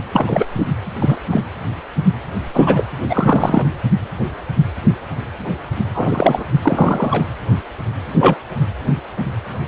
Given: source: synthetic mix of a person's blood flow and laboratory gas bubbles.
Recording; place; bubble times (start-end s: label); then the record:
Doppler ultrasound of blood flow; precordium
0.15-0.46 s: bubbles
0.55-0.64 s: bubbles
1.00-1.18 s: bubbles
1.30-1.41 s: bubbles
2.54-2.87 s: bubbles
3.08-3.79 s: bubbles
5.94-6.45 s: bubbles
6.62-7.25 s: bubbles
8.20-8.37 s: bubbles
From the record:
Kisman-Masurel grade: 233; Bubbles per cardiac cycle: several, 3 to 8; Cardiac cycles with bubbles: 50 to 99%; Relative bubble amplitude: loud (0.450 to 0.775); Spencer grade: 3 (all of the cardiac periods contain showers or single bubble signals, but not dominating or overriding the cardiac motion signals); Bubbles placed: anywhere in the cardiac cycle